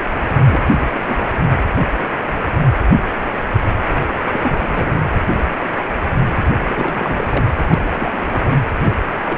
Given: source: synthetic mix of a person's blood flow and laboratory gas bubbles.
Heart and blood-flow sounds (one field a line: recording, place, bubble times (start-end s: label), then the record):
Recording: Doppler ultrasound of blood flow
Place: precordium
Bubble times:
0.25-0.59 s: bubbles
0.66-0.75 s: bubbles
0.77-1.27 s: bubbles
4.31-4.96 s: bubbles
6.68-7.27 s: bubbles
7.29-7.46 s: bubbles
7.68-7.81 s: bubbles
7.92-8.55 s: bubbles
8.85-8.96 s: bubbles
9.24-9.38 s: bubbles
From the record:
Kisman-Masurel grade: 232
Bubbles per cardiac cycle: several, 3 to 8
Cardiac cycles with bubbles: 50 to 99%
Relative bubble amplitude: moderate (0.250 to 0.450)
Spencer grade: 3 (all of the cardiac periods contain showers or single bubble signals, but not dominating or overriding the cardiac motion signals)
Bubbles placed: anywhere in the cardiac cycle